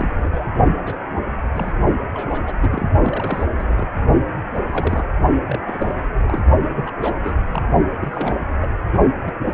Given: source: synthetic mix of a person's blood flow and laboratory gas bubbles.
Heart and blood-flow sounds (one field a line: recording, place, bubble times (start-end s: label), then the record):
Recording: Doppler ultrasound of blood flow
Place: precordium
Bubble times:
0.00-0.30 s: bubbles
0.32-0.52 s: bubbles
0.85-0.96 s: bubbles
1.53-1.73 s: bubbles
2.14-2.57 s: bubbles
2.62-2.87 s: bubbles
3.02-3.44 s: bubbles
3.57-3.87 s: bubbles
4.54-4.61 s: bubbles
4.70-5.05 s: bubbles
5.46-5.59 s: bubbles
5.67-5.94 s: bubbles
6.17-6.42 s: bubbles
6.75-6.91 s: bubbles
6.97-7.13 s: bubbles
7.23-7.34 s: bubbles
7.48-7.63 s: bubbles
8.01-8.34 s: bubbles
8.62-8.69 s: bubbles
9.22-9.35 s: bubbles
9.46-9.54 s: bubbles
From the record:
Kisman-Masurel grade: 242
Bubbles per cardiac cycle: several, 3 to 8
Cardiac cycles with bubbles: 100%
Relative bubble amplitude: moderate (0.250 to 0.450)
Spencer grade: 3 (all of the cardiac periods contain showers or single bubble signals, but not dominating or overriding the cardiac motion signals)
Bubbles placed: only in the low amplitude regions of the cardiac cycle